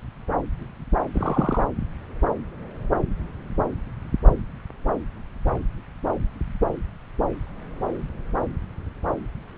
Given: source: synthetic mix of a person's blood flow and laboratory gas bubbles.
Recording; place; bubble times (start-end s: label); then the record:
Doppler ultrasound of blood flow; subclavian vein
1.14-1.64 s: bubbles
From the record:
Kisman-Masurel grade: 112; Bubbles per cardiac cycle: 1 to 2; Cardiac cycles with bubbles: 1 to 10%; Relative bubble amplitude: moderate (0.250 to 0.450); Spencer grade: 1 (occasional bubble signal discernible with the cardiac motion signal, with majority of cardiac periods free of bubbles); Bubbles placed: anywhere in the cardiac cycle